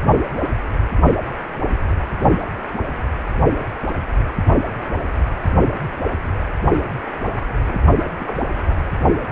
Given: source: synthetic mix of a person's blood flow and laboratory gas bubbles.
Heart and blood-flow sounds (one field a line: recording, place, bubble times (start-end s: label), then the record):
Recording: Doppler ultrasound of blood flow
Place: precordium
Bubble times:
7.68-7.79 s: bubbles
8.19-8.46 s: bubbles
8.51-8.86 s: bubbles
From the record:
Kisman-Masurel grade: 221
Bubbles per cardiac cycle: several, 3 to 8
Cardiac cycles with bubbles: 10 to 50%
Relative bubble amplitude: barely perceptible (0.100 to 0.250)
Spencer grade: 2 (many but less than half of the cardiac periods contain bubble signals, singularly or in groups)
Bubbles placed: anywhere in the cardiac cycle